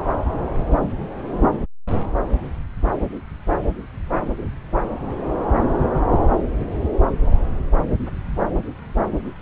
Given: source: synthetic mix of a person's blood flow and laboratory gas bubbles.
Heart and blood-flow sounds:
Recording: Doppler ultrasound of blood flow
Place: subclavian vein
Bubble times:
no bubbles
From the record:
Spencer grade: 0 (complete lack of bubble signals)

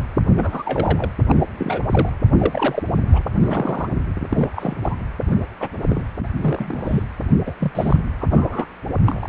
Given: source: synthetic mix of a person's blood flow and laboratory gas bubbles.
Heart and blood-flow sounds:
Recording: Doppler ultrasound of blood flow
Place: precordium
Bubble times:
0.36-1.09 s: bubbles
1.28-1.43 s: bubbles
1.57-2.10 s: bubbles
2.38-2.83 s: bubbles
3.12-3.22 s: bubbles
3.41-3.89 s: bubbles
4.30-4.75 s: bubbles
4.82-4.98 s: bubbles
5.28-5.35 s: bubbles
5.59-5.69 s: bubbles
5.88-6.04 s: bubbles
6.19-6.29 s: bubbles
6.40-7.03 s: bubbles
7.46-7.54 s: bubbles
7.60-8.00 s: bubbles
8.21-8.27 s: bubbles
8.30-8.67 s: bubbles
9.04-9.28 s: bubbles
From the record:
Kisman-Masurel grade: 242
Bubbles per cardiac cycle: several, 3 to 8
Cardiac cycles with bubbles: 100%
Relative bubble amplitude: moderate (0.250 to 0.450)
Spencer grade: 3 (all of the cardiac periods contain showers or single bubble signals, but not dominating or overriding the cardiac motion signals)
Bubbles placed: anywhere in the cardiac cycle

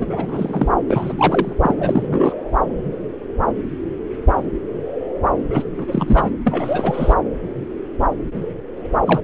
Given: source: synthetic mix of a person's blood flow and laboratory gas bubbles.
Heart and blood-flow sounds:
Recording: Doppler ultrasound of blood flow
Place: subclavian vein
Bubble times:
0.00-0.68 s: bubbles
0.88-1.54 s: bubbles
1.62-2.35 s: bubbles
5.50-5.64 s: bubbles
5.78-6.31 s: bubbles
6.46-7.15 s: bubbles
9.05-9.22 s: bubbles
From the record:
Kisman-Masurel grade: 332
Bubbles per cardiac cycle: rolling drumbeat, 9 or more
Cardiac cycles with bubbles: 50 to 99%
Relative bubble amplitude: moderate (0.250 to 0.450)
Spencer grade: 3 (all of the cardiac periods contain showers or single bubble signals, but not dominating or overriding the cardiac motion signals)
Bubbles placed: anywhere in the cardiac cycle

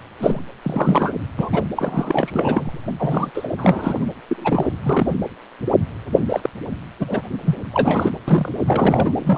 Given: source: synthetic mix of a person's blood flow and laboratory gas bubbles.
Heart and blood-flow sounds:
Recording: Doppler ultrasound of blood flow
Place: precordium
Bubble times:
0.20-0.41 s: bubbles
0.62-1.13 s: bubbles
1.38-1.65 s: bubbles
1.75-2.81 s: bubbles
2.99-3.30 s: bubbles
3.34-3.48 s: bubbles
3.57-4.05 s: bubbles
4.29-4.70 s: bubbles
4.83-5.13 s: bubbles
6.29-6.50 s: bubbles
6.99-7.22 s: bubbles
7.45-7.55 s: bubbles
7.73-8.10 s: bubbles
8.28-8.53 s: bubbles
8.67-9.12 s: bubbles
9.15-9.38 s: bubbles
From the record:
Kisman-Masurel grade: 232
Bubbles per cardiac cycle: several, 3 to 8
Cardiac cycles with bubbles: 50 to 99%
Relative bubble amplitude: moderate (0.250 to 0.450)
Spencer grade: 3 (all of the cardiac periods contain showers or single bubble signals, but not dominating or overriding the cardiac motion signals)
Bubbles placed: anywhere in the cardiac cycle

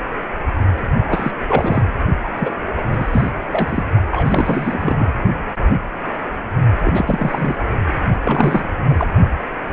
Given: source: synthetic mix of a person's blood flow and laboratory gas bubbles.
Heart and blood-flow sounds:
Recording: Doppler ultrasound of blood flow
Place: precordium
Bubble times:
1.09-1.31 s: bubbles
1.47-1.82 s: bubbles
2.24-2.29 s: bubbles
2.39-2.54 s: bubbles
2.77-2.82 s: bubbles
2.87-3.30 s: bubbles
3.50-3.83 s: bubbles
4.11-5.14 s: bubbles
6.84-7.55 s: bubbles
8.23-8.69 s: bubbles
8.89-9.06 s: bubbles
From the record:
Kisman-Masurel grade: 332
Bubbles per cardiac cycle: rolling drumbeat, 9 or more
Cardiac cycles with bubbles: 50 to 99%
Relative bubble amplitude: moderate (0.250 to 0.450)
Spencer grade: 3 (all of the cardiac periods contain showers or single bubble signals, but not dominating or overriding the cardiac motion signals)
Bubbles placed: only in the low amplitude regions of the cardiac cycle

